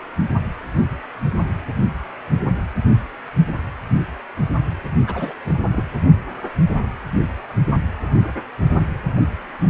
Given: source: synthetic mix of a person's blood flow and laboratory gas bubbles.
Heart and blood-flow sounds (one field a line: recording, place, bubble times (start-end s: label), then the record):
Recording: Doppler ultrasound of blood flow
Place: precordium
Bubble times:
5.07-5.36 s: bubbles
5.45-5.53 s: bubbles
5.71-5.84 s: bubbles
From the record:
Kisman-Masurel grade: 221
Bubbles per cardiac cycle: several, 3 to 8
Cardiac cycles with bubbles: 10 to 50%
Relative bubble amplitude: barely perceptible (0.100 to 0.250)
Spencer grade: 2 (many but less than half of the cardiac periods contain bubble signals, singularly or in groups)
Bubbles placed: only in the low amplitude regions of the cardiac cycle